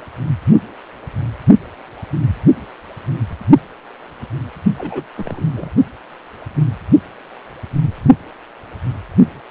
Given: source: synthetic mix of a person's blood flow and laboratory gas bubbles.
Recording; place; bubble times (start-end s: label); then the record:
Doppler ultrasound of blood flow; precordium
4.78-5.05 s: bubbles
5.18-5.44 s: bubbles
5.53-5.70 s: bubbles
From the record:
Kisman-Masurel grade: 211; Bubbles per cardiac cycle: several, 3 to 8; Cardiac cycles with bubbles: 1 to 10%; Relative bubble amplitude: barely perceptible (0.100 to 0.250); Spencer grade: 1 (occasional bubble signal discernible with the cardiac motion signal, with majority of cardiac periods free of bubbles); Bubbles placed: only in the low amplitude regions of the cardiac cycle